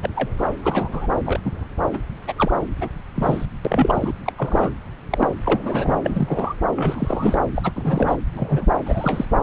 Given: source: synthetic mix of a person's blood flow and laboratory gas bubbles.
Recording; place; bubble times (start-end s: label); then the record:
Doppler ultrasound of blood flow; subclavian vein
0.02-0.08 s: bubbles
0.16-0.29 s: bubbles
0.38-0.47 s: bubbles
0.61-1.08 s: bubbles
1.26-1.40 s: bubbles
1.44-1.65 s: bubbles
1.93-1.99 s: bubbles
2.27-2.33 s: bubbles
2.38-2.51 s: bubbles
2.80-2.89 s: bubbles
3.16-3.46 s: bubbles
3.64-4.12 s: bubbles
4.26-4.33 s: bubbles
4.38-4.71 s: bubbles
5.10-5.27 s: bubbles
5.45-5.59 s: bubbles
5.63-5.98 s: bubbles
6.04-6.54 s: bubbles
6.75-7.38 s: bubbles
7.55-7.71 s: bubbles
7.75-8.16 s: bubbles
8.37-8.65 s: bubbles
8.86-9.25 s: bubbles
From the record:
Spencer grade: 3 (all of the cardiac periods contain showers or single bubble signals, but not dominating or overriding the cardiac motion signals); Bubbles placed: anywhere in the cardiac cycle